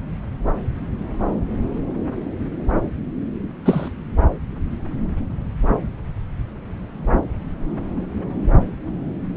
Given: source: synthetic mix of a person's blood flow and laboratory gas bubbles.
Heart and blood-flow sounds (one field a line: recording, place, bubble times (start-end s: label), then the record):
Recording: Doppler ultrasound of blood flow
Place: subclavian vein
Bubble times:
3.64-3.92 s: bubbles
From the record:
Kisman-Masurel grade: 112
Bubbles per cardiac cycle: 1 to 2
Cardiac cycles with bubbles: 1 to 10%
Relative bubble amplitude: moderate (0.250 to 0.450)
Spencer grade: 1 (occasional bubble signal discernible with the cardiac motion signal, with majority of cardiac periods free of bubbles)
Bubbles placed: anywhere in the cardiac cycle